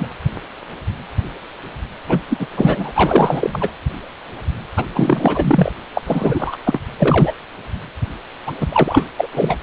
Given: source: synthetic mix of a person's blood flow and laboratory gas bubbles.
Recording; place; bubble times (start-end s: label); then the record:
Doppler ultrasound of blood flow; precordium
0.00-0.07 s: bubbles
2.07-2.23 s: bubbles
2.28-2.48 s: bubbles
2.56-3.73 s: bubbles
4.77-4.86 s: bubbles
4.95-5.72 s: bubbles
5.95-6.02 s: bubbles
6.04-6.56 s: bubbles
6.67-6.80 s: bubbles
6.98-7.33 s: bubbles
8.46-8.54 s: bubbles
8.61-8.68 s: bubbles
8.72-9.06 s: bubbles
9.16-9.28 s: bubbles
9.34-9.63 s: bubbles
From the record:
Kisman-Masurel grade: 333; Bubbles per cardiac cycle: rolling drumbeat, 9 or more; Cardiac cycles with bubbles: 50 to 99%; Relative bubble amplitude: loud (0.450 to 0.775); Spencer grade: 3 (all of the cardiac periods contain showers or single bubble signals, but not dominating or overriding the cardiac motion signals); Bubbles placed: anywhere in the cardiac cycle